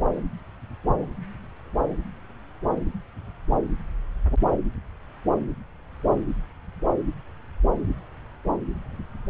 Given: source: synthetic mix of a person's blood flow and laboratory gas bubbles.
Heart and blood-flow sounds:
Doppler ultrasound of blood flow; subclavian vein
no bubbles
From the record:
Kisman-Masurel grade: 000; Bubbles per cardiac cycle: 0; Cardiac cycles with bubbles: 0%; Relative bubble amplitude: no bubbles discernible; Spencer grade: 0 (complete lack of bubble signals)

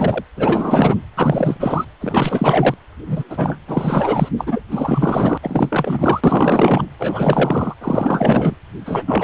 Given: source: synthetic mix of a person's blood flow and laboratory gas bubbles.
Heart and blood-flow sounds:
Doppler ultrasound of blood flow; precordium
0.00-0.23 s: bubbles
0.36-0.95 s: bubbles
1.17-1.85 s: bubbles
2.00-2.74 s: bubbles
3.06-3.25 s: bubbles
3.29-3.58 s: bubbles
3.67-4.29 s: bubbles
4.38-4.60 s: bubbles
4.70-5.38 s: bubbles
5.42-6.21 s: bubbles
6.23-6.86 s: bubbles
6.99-7.76 s: bubbles
7.81-8.57 s: bubbles
8.85-9.24 s: bubbles
From the record:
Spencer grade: 4 (maximum detectable bubble signal sounding continuously throughout systole and diastole of every cardiac period, and overriding the amplitude of the normal cardiac signals); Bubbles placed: anywhere in the cardiac cycle

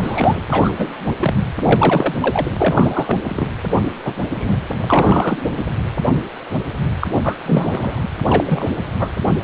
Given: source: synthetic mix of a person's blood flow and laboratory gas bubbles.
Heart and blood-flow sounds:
Doppler ultrasound of blood flow; precordium
0.02-0.40 s: bubbles
0.50-1.12 s: bubbles
1.20-1.34 s: bubbles
1.59-2.15 s: bubbles
2.20-2.50 s: bubbles
2.57-3.48 s: bubbles
4.04-4.14 s: bubbles
4.29-4.58 s: bubbles
4.80-5.37 s: bubbles
5.58-5.64 s: bubbles
7.00-7.08 s: bubbles
7.23-7.38 s: bubbles
7.46-8.03 s: bubbles
8.28-8.67 s: bubbles
8.99-9.08 s: bubbles
From the record:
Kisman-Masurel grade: 233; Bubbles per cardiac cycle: several, 3 to 8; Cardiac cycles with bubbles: 50 to 99%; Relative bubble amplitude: loud (0.450 to 0.775); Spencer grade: 3 (all of the cardiac periods contain showers or single bubble signals, but not dominating or overriding the cardiac motion signals); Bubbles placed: anywhere in the cardiac cycle

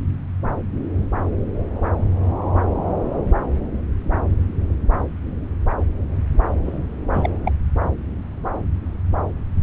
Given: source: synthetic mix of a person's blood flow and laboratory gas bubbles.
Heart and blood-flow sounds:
Doppler ultrasound of blood flow; subclavian vein
6.64-6.96 s: bubbles
7.13-7.29 s: bubbles
7.45-7.51 s: bubbles
From the record:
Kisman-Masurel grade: 212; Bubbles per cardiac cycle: several, 3 to 8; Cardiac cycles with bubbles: 1 to 10%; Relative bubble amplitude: moderate (0.250 to 0.450); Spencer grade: 1 (occasional bubble signal discernible with the cardiac motion signal, with majority of cardiac periods free of bubbles); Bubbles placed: anywhere in the cardiac cycle

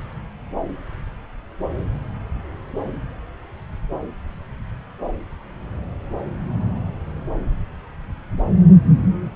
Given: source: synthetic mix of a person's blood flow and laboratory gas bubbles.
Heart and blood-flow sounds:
Doppler ultrasound of blood flow; subclavian vein
no bubbles
From the record:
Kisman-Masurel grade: 000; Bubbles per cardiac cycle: 0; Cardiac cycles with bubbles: 0%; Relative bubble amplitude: no bubbles discernible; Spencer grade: 0 (complete lack of bubble signals)

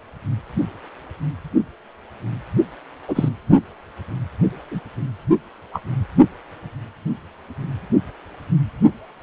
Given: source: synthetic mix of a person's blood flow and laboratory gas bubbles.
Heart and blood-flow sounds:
Doppler ultrasound of blood flow; precordium
3.08-3.29 s: bubbles
4.71-4.80 s: bubbles
5.73-5.82 s: bubbles
From the record:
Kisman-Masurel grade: 123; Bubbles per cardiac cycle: 1 to 2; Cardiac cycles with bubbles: 10 to 50%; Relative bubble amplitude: loud (0.450 to 0.775); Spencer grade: 2 (many but less than half of the cardiac periods contain bubble signals, singularly or in groups); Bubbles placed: anywhere in the cardiac cycle

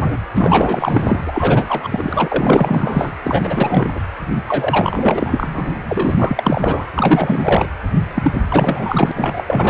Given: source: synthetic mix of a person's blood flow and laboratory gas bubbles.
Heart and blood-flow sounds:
Doppler ultrasound of blood flow; precordium
0.00-0.18 s: bubbles
0.34-1.21 s: bubbles
1.25-3.14 s: bubbles
3.23-3.91 s: bubbles
3.95-4.00 s: bubbles
4.48-5.75 s: bubbles
5.88-6.86 s: bubbles
6.95-7.69 s: bubbles
8.14-8.42 s: bubbles
8.48-9.11 s: bubbles
9.15-9.44 s: bubbles
9.47-9.70 s: bubbles
From the record:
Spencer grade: 4 (maximum detectable bubble signal sounding continuously throughout systole and diastole of every cardiac period, and overriding the amplitude of the normal cardiac signals); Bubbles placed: anywhere in the cardiac cycle

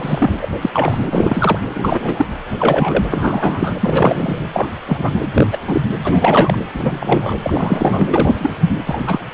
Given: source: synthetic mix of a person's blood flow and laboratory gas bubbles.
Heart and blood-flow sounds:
Doppler ultrasound of blood flow; precordium
0.00-0.31 s: bubbles
0.41-0.48 s: bubbles
0.61-0.70 s: bubbles
0.73-0.98 s: bubbles
1.06-1.60 s: bubbles
1.73-2.26 s: bubbles
2.58-3.04 s: bubbles
3.10-3.75 s: bubbles
3.80-4.43 s: bubbles
4.53-4.69 s: bubbles
4.86-5.12 s: bubbles
5.34-5.47 s: bubbles
5.51-5.58 s: bubbles
5.67-5.82 s: bubbles
6.04-6.58 s: bubbles
6.74-7.34 s: bubbles
7.43-8.06 s: bubbles
8.11-8.64 s: bubbles
8.86-9.19 s: bubbles
From the record:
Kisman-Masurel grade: 243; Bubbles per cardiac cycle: several, 3 to 8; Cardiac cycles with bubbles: 100%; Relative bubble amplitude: loud (0.450 to 0.775); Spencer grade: 3 (all of the cardiac periods contain showers or single bubble signals, but not dominating or overriding the cardiac motion signals); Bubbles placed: anywhere in the cardiac cycle

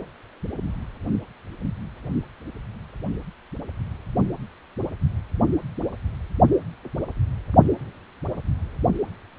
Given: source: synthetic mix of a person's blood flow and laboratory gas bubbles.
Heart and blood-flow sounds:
Doppler ultrasound of blood flow; precordium
no bubbles
From the record:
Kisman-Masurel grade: 000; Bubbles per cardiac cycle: 0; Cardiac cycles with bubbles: 0%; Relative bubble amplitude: no bubbles discernible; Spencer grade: 0 (complete lack of bubble signals)

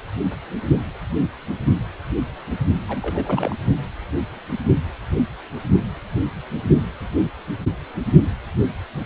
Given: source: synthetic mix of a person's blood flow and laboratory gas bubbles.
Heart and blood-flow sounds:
Doppler ultrasound of blood flow; precordium
2.88-3.56 s: bubbles
From the record:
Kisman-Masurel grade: 221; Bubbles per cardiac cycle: several, 3 to 8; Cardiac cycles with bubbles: 10 to 50%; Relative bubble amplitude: barely perceptible (0.100 to 0.250); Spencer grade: 2 (many but less than half of the cardiac periods contain bubble signals, singularly or in groups); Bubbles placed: only in the low amplitude regions of the cardiac cycle

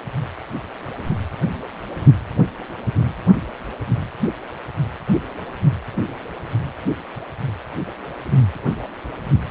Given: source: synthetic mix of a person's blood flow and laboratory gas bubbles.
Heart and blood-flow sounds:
Doppler ultrasound of blood flow; precordium
no bubbles
From the record:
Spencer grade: 0 (complete lack of bubble signals)

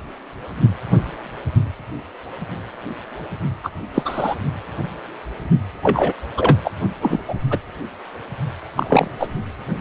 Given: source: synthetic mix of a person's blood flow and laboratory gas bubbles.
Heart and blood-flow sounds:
Doppler ultrasound of blood flow; precordium
3.63-3.70 s: bubbles
3.94-4.36 s: bubbles
5.83-6.14 s: bubbles
6.37-6.57 s: bubbles
6.64-6.71 s: bubbles
7.02-7.20 s: bubbles
7.28-7.34 s: bubbles
7.50-7.59 s: bubbles
8.77-9.08 s: bubbles
9.19-9.28 s: bubbles
From the record:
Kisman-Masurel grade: 223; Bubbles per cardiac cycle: several, 3 to 8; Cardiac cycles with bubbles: 10 to 50%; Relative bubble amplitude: loud (0.450 to 0.775); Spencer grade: 2 (many but less than half of the cardiac periods contain bubble signals, singularly or in groups); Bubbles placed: only in the low amplitude regions of the cardiac cycle

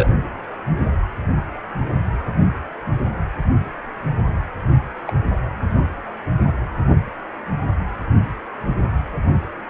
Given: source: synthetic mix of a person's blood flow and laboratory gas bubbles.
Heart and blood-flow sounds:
Doppler ultrasound of blood flow; precordium
0.00-0.09 s: bubbles
5.06-5.13 s: bubbles
From the record:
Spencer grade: 2 (many but less than half of the cardiac periods contain bubble signals, singularly or in groups); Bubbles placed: anywhere in the cardiac cycle

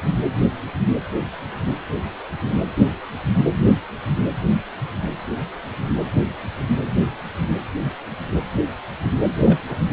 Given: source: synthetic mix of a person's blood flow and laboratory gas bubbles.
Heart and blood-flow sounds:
Doppler ultrasound of blood flow; precordium
5.37-5.42 s: bubbles
9.46-9.58 s: bubbles
9.69-9.79 s: bubbles
From the record:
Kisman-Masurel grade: 121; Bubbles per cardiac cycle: 1 to 2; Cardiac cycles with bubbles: 10 to 50%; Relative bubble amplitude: barely perceptible (0.100 to 0.250); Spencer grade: 2 (many but less than half of the cardiac periods contain bubble signals, singularly or in groups); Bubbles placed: anywhere in the cardiac cycle

